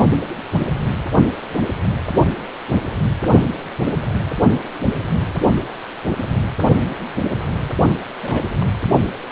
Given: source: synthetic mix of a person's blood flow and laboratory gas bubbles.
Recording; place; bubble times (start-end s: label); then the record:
Doppler ultrasound of blood flow; precordium
8.22-8.48 s: bubbles
8.51-8.79 s: bubbles
From the record:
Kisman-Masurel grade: 221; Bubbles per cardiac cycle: several, 3 to 8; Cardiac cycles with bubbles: 10 to 50%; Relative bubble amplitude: barely perceptible (0.100 to 0.250); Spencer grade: 2 (many but less than half of the cardiac periods contain bubble signals, singularly or in groups); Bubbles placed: only in the low amplitude regions of the cardiac cycle